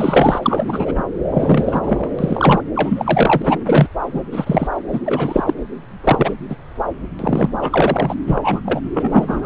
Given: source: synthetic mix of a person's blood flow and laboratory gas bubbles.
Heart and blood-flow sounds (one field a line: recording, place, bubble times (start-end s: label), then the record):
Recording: Doppler ultrasound of blood flow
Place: subclavian vein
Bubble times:
0.00-1.03 s: bubbles
1.31-2.09 s: bubbles
2.18-2.61 s: bubbles
2.75-3.58 s: bubbles
3.66-3.88 s: bubbles
4.13-4.22 s: bubbles
4.32-4.67 s: bubbles
4.92-5.00 s: bubbles
5.05-5.54 s: bubbles
6.04-6.37 s: bubbles
6.49-6.56 s: bubbles
7.19-7.50 s: bubbles
7.60-8.14 s: bubbles
8.27-8.61 s: bubbles
8.65-8.80 s: bubbles
8.94-9.46 s: bubbles
From the record:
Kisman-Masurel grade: 243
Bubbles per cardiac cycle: several, 3 to 8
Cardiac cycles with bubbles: 100%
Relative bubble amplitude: loud (0.450 to 0.775)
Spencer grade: 3 (all of the cardiac periods contain showers or single bubble signals, but not dominating or overriding the cardiac motion signals)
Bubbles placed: anywhere in the cardiac cycle